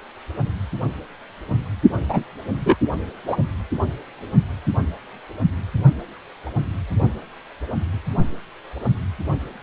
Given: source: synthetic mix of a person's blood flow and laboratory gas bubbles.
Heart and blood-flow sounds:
Doppler ultrasound of blood flow; precordium
2.08-2.23 s: bubbles
2.65-2.77 s: bubbles
3.27-3.38 s: bubbles
From the record:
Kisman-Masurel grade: 123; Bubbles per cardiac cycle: 1 to 2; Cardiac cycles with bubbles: 10 to 50%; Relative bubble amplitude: loud (0.450 to 0.775); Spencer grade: 2 (many but less than half of the cardiac periods contain bubble signals, singularly or in groups); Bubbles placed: only in the low amplitude regions of the cardiac cycle

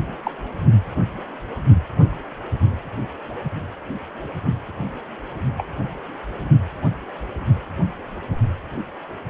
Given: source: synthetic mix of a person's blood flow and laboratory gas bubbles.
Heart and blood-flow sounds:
Doppler ultrasound of blood flow; precordium
0.23-0.31 s: bubbles
5.58-5.66 s: bubbles
From the record:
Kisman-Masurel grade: 122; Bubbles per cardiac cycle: 1 to 2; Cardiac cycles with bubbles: 10 to 50%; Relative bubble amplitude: moderate (0.250 to 0.450); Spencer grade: 2 (many but less than half of the cardiac periods contain bubble signals, singularly or in groups); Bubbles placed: only in the low amplitude regions of the cardiac cycle

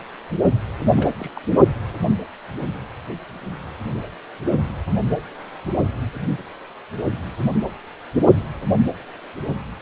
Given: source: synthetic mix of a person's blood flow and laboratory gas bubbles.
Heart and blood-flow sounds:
Doppler ultrasound of blood flow; precordium
0.83-1.31 s: bubbles
1.35-1.40 s: bubbles
From the record:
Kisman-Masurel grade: 211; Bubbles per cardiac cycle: several, 3 to 8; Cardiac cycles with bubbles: 1 to 10%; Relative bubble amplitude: barely perceptible (0.100 to 0.250); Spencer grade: 1 (occasional bubble signal discernible with the cardiac motion signal, with majority of cardiac periods free of bubbles); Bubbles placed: only in the low amplitude regions of the cardiac cycle

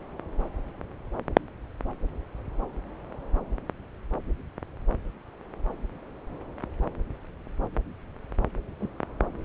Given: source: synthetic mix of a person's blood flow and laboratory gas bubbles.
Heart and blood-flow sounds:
Doppler ultrasound of blood flow; subclavian vein
8.79-8.89 s: bubbles
From the record:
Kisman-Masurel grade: 111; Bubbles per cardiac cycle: 1 to 2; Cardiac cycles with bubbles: 1 to 10%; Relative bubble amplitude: barely perceptible (0.100 to 0.250); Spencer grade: 1 (occasional bubble signal discernible with the cardiac motion signal, with majority of cardiac periods free of bubbles); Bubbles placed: anywhere in the cardiac cycle

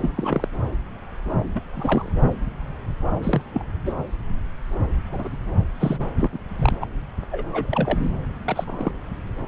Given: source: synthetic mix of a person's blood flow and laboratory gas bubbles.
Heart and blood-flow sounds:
Doppler ultrasound of blood flow; subclavian vein
0.01-0.12 s: bubbles
0.16-0.48 s: bubbles
1.55-1.60 s: bubbles
1.73-2.12 s: bubbles
3.22-3.42 s: bubbles
3.54-3.64 s: bubbles
3.85-3.92 s: bubbles
5.12-5.29 s: bubbles
5.79-6.08 s: bubbles
6.18-6.29 s: bubbles
6.33-6.38 s: bubbles
6.60-6.76 s: bubbles
6.81-6.86 s: bubbles
7.31-8.07 s: bubbles
8.45-8.92 s: bubbles
From the record:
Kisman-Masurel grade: 242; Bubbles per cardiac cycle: several, 3 to 8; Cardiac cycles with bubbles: 100%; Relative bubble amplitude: moderate (0.250 to 0.450); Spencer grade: 3 (all of the cardiac periods contain showers or single bubble signals, but not dominating or overriding the cardiac motion signals); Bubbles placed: anywhere in the cardiac cycle

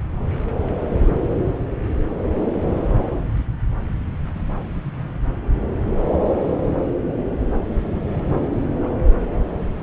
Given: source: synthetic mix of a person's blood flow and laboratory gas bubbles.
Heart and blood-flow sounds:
Doppler ultrasound of blood flow; subclavian vein
8.81-8.90 s: bubbles
From the record:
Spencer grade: 1 (occasional bubble signal discernible with the cardiac motion signal, with majority of cardiac periods free of bubbles); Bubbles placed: anywhere in the cardiac cycle

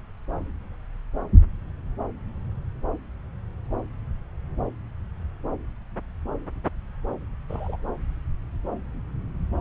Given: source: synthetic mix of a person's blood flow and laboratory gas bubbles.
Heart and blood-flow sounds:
Doppler ultrasound of blood flow; subclavian vein
7.48-7.77 s: bubbles
From the record:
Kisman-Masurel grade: 111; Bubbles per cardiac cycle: 1 to 2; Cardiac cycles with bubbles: 1 to 10%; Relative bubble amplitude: barely perceptible (0.100 to 0.250); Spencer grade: 1 (occasional bubble signal discernible with the cardiac motion signal, with majority of cardiac periods free of bubbles); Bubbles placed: anywhere in the cardiac cycle

